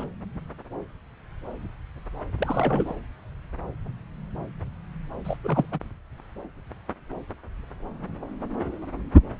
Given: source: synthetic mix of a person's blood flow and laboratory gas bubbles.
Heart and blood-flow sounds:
Doppler ultrasound of blood flow; subclavian vein
0.00-0.04 s: bubbles
2.39-2.95 s: bubbles
5.25-5.37 s: bubbles
5.44-5.66 s: bubbles
5.71-5.79 s: bubbles
From the record:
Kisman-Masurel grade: 221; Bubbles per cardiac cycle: several, 3 to 8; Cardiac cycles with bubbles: 10 to 50%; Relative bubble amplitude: barely perceptible (0.100 to 0.250); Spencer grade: 2 (many but less than half of the cardiac periods contain bubble signals, singularly or in groups); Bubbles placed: anywhere in the cardiac cycle

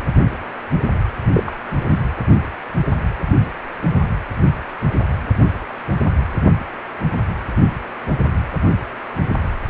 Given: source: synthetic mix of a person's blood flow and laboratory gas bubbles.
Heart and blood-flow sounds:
Doppler ultrasound of blood flow; precordium
1.32-1.53 s: bubbles
1.89-2.00 s: bubbles
From the record:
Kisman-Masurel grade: 112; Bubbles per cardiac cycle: 1 to 2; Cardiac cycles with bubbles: 1 to 10%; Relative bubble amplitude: moderate (0.250 to 0.450); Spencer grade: 1 (occasional bubble signal discernible with the cardiac motion signal, with majority of cardiac periods free of bubbles); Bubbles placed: anywhere in the cardiac cycle

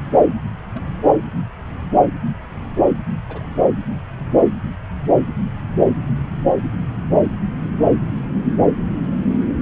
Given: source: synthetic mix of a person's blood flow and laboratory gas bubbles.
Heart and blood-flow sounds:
Doppler ultrasound of blood flow; subclavian vein
0.74-0.82 s: bubbles
3.29-3.43 s: bubbles
From the record:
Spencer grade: 2 (many but less than half of the cardiac periods contain bubble signals, singularly or in groups); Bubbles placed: anywhere in the cardiac cycle

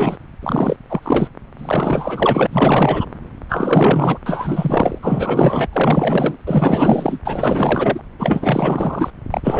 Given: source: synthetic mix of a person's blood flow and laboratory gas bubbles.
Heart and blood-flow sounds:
Doppler ultrasound of blood flow; subclavian vein
0.00-0.17 s: bubbles
0.42-0.77 s: bubbles
0.89-1.28 s: bubbles
1.58-2.47 s: bubbles
2.52-3.06 s: bubbles
3.49-4.19 s: bubbles
4.26-4.98 s: bubbles
5.02-5.67 s: bubbles
5.72-6.36 s: bubbles
6.46-7.17 s: bubbles
7.25-8.00 s: bubbles
8.19-9.10 s: bubbles
9.30-9.41 s: bubbles
9.44-9.60 s: bubbles
From the record:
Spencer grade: 4 (maximum detectable bubble signal sounding continuously throughout systole and diastole of every cardiac period, and overriding the amplitude of the normal cardiac signals); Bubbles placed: anywhere in the cardiac cycle

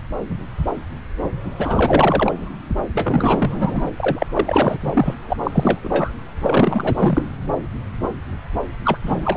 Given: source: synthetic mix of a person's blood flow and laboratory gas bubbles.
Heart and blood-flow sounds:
Doppler ultrasound of blood flow; subclavian vein
1.58-2.49 s: bubbles
2.94-3.90 s: bubbles
3.97-4.26 s: bubbles
4.36-4.78 s: bubbles
4.80-5.14 s: bubbles
5.27-5.37 s: bubbles
5.43-5.79 s: bubbles
5.83-6.12 s: bubbles
6.41-7.26 s: bubbles
8.85-8.97 s: bubbles
9.02-9.37 s: bubbles
From the record:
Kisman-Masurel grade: 332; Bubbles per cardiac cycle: rolling drumbeat, 9 or more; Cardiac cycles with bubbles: 50 to 99%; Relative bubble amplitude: moderate (0.250 to 0.450); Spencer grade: 3 (all of the cardiac periods contain showers or single bubble signals, but not dominating or overriding the cardiac motion signals); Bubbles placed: anywhere in the cardiac cycle

